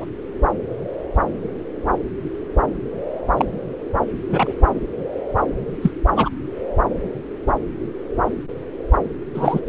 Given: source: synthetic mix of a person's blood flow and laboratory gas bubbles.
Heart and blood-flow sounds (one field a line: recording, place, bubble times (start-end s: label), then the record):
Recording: Doppler ultrasound of blood flow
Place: subclavian vein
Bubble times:
0.00-0.05 s: bubbles
3.37-3.45 s: bubbles
4.31-4.52 s: bubbles
5.82-5.91 s: bubbles
6.15-6.29 s: bubbles
9.34-9.60 s: bubbles
From the record:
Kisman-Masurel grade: 123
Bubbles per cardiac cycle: 1 to 2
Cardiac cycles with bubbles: 10 to 50%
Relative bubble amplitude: loud (0.450 to 0.775)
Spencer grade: 2 (many but less than half of the cardiac periods contain bubble signals, singularly or in groups)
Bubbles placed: anywhere in the cardiac cycle